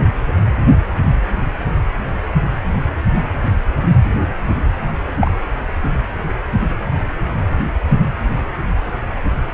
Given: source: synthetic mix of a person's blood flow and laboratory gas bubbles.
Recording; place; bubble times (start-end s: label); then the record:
Doppler ultrasound of blood flow; precordium
5.20-5.32 s: bubbles
From the record:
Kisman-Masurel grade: 113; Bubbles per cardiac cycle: 1 to 2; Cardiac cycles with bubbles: 1 to 10%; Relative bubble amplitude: loud (0.450 to 0.775); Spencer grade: 1 (occasional bubble signal discernible with the cardiac motion signal, with majority of cardiac periods free of bubbles); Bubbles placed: anywhere in the cardiac cycle